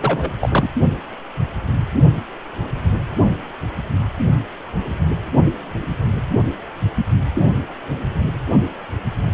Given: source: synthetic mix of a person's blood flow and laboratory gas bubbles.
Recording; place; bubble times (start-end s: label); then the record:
Doppler ultrasound of blood flow; precordium
0.01-0.31 s: bubbles
0.40-0.68 s: bubbles
From the record:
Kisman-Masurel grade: 213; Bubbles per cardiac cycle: several, 3 to 8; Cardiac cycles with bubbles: 1 to 10%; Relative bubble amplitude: loud (0.450 to 0.775); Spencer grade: 1 (occasional bubble signal discernible with the cardiac motion signal, with majority of cardiac periods free of bubbles); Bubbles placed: anywhere in the cardiac cycle